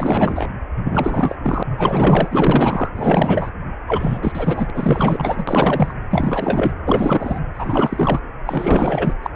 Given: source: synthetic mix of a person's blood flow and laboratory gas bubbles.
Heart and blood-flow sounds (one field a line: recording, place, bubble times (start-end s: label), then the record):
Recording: Doppler ultrasound of blood flow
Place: precordium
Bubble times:
0.00-0.50 s: bubbles
0.84-1.35 s: bubbles
1.43-2.89 s: bubbles
2.96-3.50 s: bubbles
3.87-4.70 s: bubbles
4.74-5.93 s: bubbles
6.10-6.71 s: bubbles
6.84-7.38 s: bubbles
7.54-8.20 s: bubbles
8.45-9.13 s: bubbles
9.22-9.28 s: bubbles
From the record:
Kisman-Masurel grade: 444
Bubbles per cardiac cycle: continuous sound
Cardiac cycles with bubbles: 100%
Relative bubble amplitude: maximal (0.775 to 0.999)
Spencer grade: 4 (maximum detectable bubble signal sounding continuously throughout systole and diastole of every cardiac period, and overriding the amplitude of the normal cardiac signals)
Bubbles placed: anywhere in the cardiac cycle